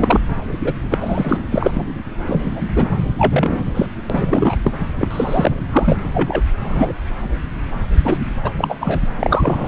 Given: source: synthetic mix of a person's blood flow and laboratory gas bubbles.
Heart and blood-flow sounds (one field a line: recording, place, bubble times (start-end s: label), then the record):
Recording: Doppler ultrasound of blood flow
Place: subclavian vein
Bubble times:
0.00-0.19 s: bubbles
0.64-0.73 s: bubbles
0.90-0.98 s: bubbles
1.00-1.38 s: bubbles
1.50-1.71 s: bubbles
1.73-1.84 s: bubbles
2.27-3.07 s: bubbles
3.19-3.60 s: bubbles
3.74-3.86 s: bubbles
4.09-4.57 s: bubbles
4.63-4.72 s: bubbles
4.99-5.52 s: bubbles
5.71-6.09 s: bubbles
6.13-6.42 s: bubbles
6.63-6.92 s: bubbles
8.04-8.17 s: bubbles
8.42-8.51 s: bubbles
8.58-8.75 s: bubbles
8.80-9.00 s: bubbles
9.19-9.68 s: bubbles
From the record:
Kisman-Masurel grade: 333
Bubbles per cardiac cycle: rolling drumbeat, 9 or more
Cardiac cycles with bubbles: 50 to 99%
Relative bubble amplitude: loud (0.450 to 0.775)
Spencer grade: 3 (all of the cardiac periods contain showers or single bubble signals, but not dominating or overriding the cardiac motion signals)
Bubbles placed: anywhere in the cardiac cycle